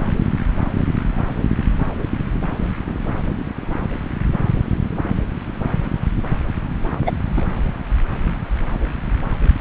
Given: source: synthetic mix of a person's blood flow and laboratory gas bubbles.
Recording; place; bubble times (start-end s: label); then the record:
Doppler ultrasound of blood flow; subclavian vein
7.06-7.12 s: bubbles
7.36-7.45 s: bubbles
From the record:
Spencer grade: 2 (many but less than half of the cardiac periods contain bubble signals, singularly or in groups); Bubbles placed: anywhere in the cardiac cycle